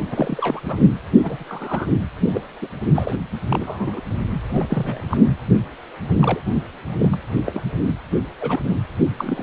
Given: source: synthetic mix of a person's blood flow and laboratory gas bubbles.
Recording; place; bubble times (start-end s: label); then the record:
Doppler ultrasound of blood flow; precordium
0.10-0.60 s: bubbles
0.65-0.84 s: bubbles
1.23-1.44 s: bubbles
1.48-1.90 s: bubbles
2.33-2.43 s: bubbles
2.62-2.67 s: bubbles
2.95-3.16 s: bubbles
3.48-4.00 s: bubbles
4.49-4.67 s: bubbles
4.69-5.21 s: bubbles
6.19-6.40 s: bubbles
6.99-7.17 s: bubbles
7.46-7.62 s: bubbles
7.86-7.92 s: bubbles
8.41-8.60 s: bubbles
9.19-9.43 s: bubbles
From the record:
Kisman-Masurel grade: 242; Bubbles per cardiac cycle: several, 3 to 8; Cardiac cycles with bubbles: 100%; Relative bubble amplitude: moderate (0.250 to 0.450); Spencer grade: 3 (all of the cardiac periods contain showers or single bubble signals, but not dominating or overriding the cardiac motion signals); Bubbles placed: anywhere in the cardiac cycle